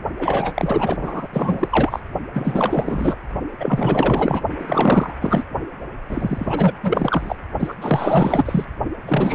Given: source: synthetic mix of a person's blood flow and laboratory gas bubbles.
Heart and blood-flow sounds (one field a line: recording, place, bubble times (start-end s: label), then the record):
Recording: Doppler ultrasound of blood flow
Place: precordium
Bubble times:
0.19-0.97 s: bubbles
1.01-1.28 s: bubbles
1.33-2.00 s: bubbles
2.33-3.17 s: bubbles
3.60-4.42 s: bubbles
4.59-5.12 s: bubbles
5.20-5.44 s: bubbles
6.09-6.73 s: bubbles
6.82-7.35 s: bubbles
7.59-7.74 s: bubbles
7.80-8.65 s: bubbles
9.07-9.35 s: bubbles
From the record:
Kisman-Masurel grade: 444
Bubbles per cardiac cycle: continuous sound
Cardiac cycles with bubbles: 100%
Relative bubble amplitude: maximal (0.775 to 0.999)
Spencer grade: 4 (maximum detectable bubble signal sounding continuously throughout systole and diastole of every cardiac period, and overriding the amplitude of the normal cardiac signals)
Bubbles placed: only in the low amplitude regions of the cardiac cycle